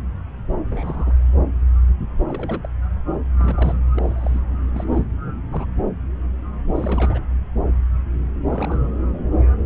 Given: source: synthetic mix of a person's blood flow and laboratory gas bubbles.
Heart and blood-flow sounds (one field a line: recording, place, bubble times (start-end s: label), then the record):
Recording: Doppler ultrasound of blood flow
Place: subclavian vein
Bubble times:
0.65-1.12 s: bubbles
2.29-2.60 s: bubbles
2.63-2.68 s: bubbles
3.38-3.82 s: bubbles
3.96-4.40 s: bubbles
4.74-5.05 s: bubbles
5.26-5.33 s: bubbles
5.53-5.66 s: bubbles
6.74-7.21 s: bubbles
8.44-8.79 s: bubbles
From the record:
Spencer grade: 2 (many but less than half of the cardiac periods contain bubble signals, singularly or in groups)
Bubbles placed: anywhere in the cardiac cycle